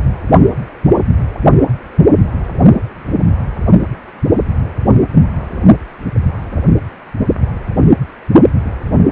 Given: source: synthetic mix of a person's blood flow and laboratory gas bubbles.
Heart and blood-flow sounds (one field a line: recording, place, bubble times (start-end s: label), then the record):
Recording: Doppler ultrasound of blood flow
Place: precordium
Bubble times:
no bubbles
From the record:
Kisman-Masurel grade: 000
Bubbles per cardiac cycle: 0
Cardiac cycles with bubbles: 0%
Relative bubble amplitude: no bubbles discernible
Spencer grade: 0 (complete lack of bubble signals)